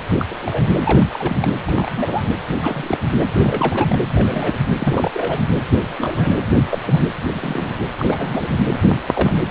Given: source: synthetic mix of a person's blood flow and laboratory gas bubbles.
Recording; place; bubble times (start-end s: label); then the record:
Doppler ultrasound of blood flow; precordium
0.18-0.26 s: bubbles
0.28-1.06 s: bubbles
1.12-1.38 s: bubbles
1.42-1.52 s: bubbles
1.68-2.30 s: bubbles
2.62-2.98 s: bubbles
3.16-3.25 s: bubbles
3.38-3.98 s: bubbles
4.14-4.58 s: bubbles
4.79-5.47 s: bubbles
5.96-6.37 s: bubbles
6.48-6.62 s: bubbles
6.70-6.79 s: bubbles
6.85-7.02 s: bubbles
7.30-7.80 s: bubbles
7.98-8.58 s: bubbles
9.07-9.34 s: bubbles
From the record:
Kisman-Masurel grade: 242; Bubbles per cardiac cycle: several, 3 to 8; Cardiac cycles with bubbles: 100%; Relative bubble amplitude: moderate (0.250 to 0.450); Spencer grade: 3 (all of the cardiac periods contain showers or single bubble signals, but not dominating or overriding the cardiac motion signals); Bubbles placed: anywhere in the cardiac cycle